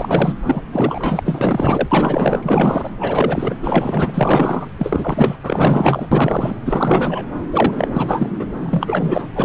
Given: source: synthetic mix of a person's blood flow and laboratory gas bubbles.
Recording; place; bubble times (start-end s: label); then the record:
Doppler ultrasound of blood flow; subclavian vein
0.00-0.38 s: bubbles
0.45-0.61 s: bubbles
0.72-1.89 s: bubbles
1.91-2.90 s: bubbles
3.00-3.56 s: bubbles
3.62-4.68 s: bubbles
4.78-5.36 s: bubbles
5.42-6.08 s: bubbles
6.12-6.56 s: bubbles
6.65-7.26 s: bubbles
7.52-7.73 s: bubbles
7.77-7.88 s: bubbles
7.94-8.49 s: bubbles
8.60-9.27 s: bubbles
9.32-9.45 s: bubbles
From the record:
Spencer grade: 4 (maximum detectable bubble signal sounding continuously throughout systole and diastole of every cardiac period, and overriding the amplitude of the normal cardiac signals); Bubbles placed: anywhere in the cardiac cycle